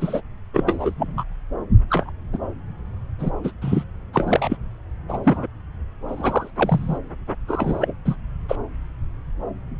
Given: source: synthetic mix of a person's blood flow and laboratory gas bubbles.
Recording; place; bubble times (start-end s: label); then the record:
Doppler ultrasound of blood flow; subclavian vein
0.00-0.21 s: bubbles
0.53-0.94 s: bubbles
0.97-1.25 s: bubbles
1.89-2.10 s: bubbles
2.32-2.38 s: bubbles
3.19-3.30 s: bubbles
3.44-3.51 s: bubbles
3.61-3.84 s: bubbles
4.13-4.56 s: bubbles
5.08-5.18 s: bubbles
5.23-5.46 s: bubbles
6.08-6.50 s: bubbles
6.56-6.98 s: bubbles
7.47-7.94 s: bubbles
8.05-8.16 s: bubbles
8.48-8.56 s: bubbles
From the record:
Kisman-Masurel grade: 232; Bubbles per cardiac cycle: several, 3 to 8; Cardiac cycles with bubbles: 50 to 99%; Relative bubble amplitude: moderate (0.250 to 0.450); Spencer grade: 3 (all of the cardiac periods contain showers or single bubble signals, but not dominating or overriding the cardiac motion signals); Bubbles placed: anywhere in the cardiac cycle